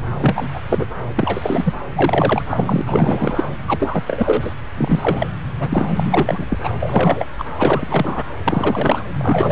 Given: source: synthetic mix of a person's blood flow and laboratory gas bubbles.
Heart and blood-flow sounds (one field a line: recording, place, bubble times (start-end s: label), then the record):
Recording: Doppler ultrasound of blood flow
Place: subclavian vein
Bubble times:
0.20-0.48 s: bubbles
0.53-0.60 s: bubbles
0.68-0.85 s: bubbles
1.15-1.73 s: bubbles
1.96-2.42 s: bubbles
2.48-2.81 s: bubbles
2.86-3.48 s: bubbles
3.68-4.04 s: bubbles
4.07-4.54 s: bubbles
4.77-5.30 s: bubbles
5.59-5.87 s: bubbles
5.96-6.45 s: bubbles
6.48-6.58 s: bubbles
6.63-6.70 s: bubbles
6.80-7.27 s: bubbles
7.38-7.44 s: bubbles
7.57-8.23 s: bubbles
8.45-9.04 s: bubbles
9.16-9.52 s: bubbles
From the record:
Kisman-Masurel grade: 343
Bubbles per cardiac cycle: rolling drumbeat, 9 or more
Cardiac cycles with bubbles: 100%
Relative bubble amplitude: loud (0.450 to 0.775)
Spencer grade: 3 (all of the cardiac periods contain showers or single bubble signals, but not dominating or overriding the cardiac motion signals)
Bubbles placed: anywhere in the cardiac cycle